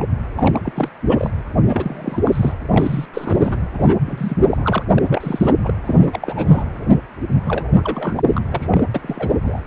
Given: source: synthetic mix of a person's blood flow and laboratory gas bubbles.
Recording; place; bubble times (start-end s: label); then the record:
Doppler ultrasound of blood flow; precordium
0.00-0.04 s: bubbles
0.36-0.88 s: bubbles
1.09-1.30 s: bubbles
1.67-2.53 s: bubbles
2.71-3.05 s: bubbles
3.13-3.61 s: bubbles
3.73-3.95 s: bubbles
4.05-4.37 s: bubbles
4.50-4.83 s: bubbles
4.94-5.03 s: bubbles
5.09-5.54 s: bubbles
5.64-5.74 s: bubbles
5.84-6.65 s: bubbles
7.46-7.65 s: bubbles
7.75-8.40 s: bubbles
8.50-8.66 s: bubbles
8.70-8.87 s: bubbles
8.94-9.33 s: bubbles
9.42-9.60 s: bubbles
From the record:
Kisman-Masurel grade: 342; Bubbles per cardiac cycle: rolling drumbeat, 9 or more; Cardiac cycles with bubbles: 100%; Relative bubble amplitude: moderate (0.250 to 0.450); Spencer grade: 3 (all of the cardiac periods contain showers or single bubble signals, but not dominating or overriding the cardiac motion signals); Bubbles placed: anywhere in the cardiac cycle